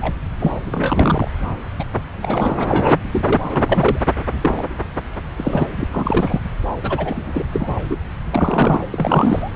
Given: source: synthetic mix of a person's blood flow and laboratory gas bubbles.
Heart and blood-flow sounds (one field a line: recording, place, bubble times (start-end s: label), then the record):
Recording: Doppler ultrasound of blood flow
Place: subclavian vein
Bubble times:
0.00-0.14 s: bubbles
0.39-0.60 s: bubbles
0.72-1.28 s: bubbles
1.79-1.84 s: bubbles
2.22-2.54 s: bubbles
2.58-3.00 s: bubbles
3.12-3.38 s: bubbles
3.42-3.99 s: bubbles
4.41-4.67 s: bubbles
5.37-5.66 s: bubbles
5.75-5.88 s: bubbles
5.91-6.40 s: bubbles
6.83-7.44 s: bubbles
7.52-7.79 s: bubbles
7.89-7.96 s: bubbles
8.33-8.88 s: bubbles
8.91-9.52 s: bubbles
From the record:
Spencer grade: 3 (all of the cardiac periods contain showers or single bubble signals, but not dominating or overriding the cardiac motion signals)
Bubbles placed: anywhere in the cardiac cycle